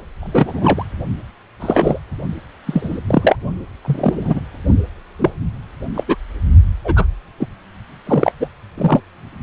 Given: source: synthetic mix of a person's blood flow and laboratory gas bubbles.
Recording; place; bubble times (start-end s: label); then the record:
Doppler ultrasound of blood flow; precordium
0.21-0.85 s: bubbles
1.59-1.99 s: bubbles
2.66-2.98 s: bubbles
3.07-3.36 s: bubbles
3.85-4.40 s: bubbles
5.19-5.30 s: bubbles
5.94-6.04 s: bubbles
6.08-6.16 s: bubbles
6.84-7.05 s: bubbles
7.40-7.48 s: bubbles
8.05-8.32 s: bubbles
8.40-8.47 s: bubbles
8.78-9.00 s: bubbles
From the record:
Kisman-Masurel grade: 233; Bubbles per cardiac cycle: several, 3 to 8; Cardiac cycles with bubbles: 50 to 99%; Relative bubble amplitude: loud (0.450 to 0.775); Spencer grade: 3 (all of the cardiac periods contain showers or single bubble signals, but not dominating or overriding the cardiac motion signals); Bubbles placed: only in the low amplitude regions of the cardiac cycle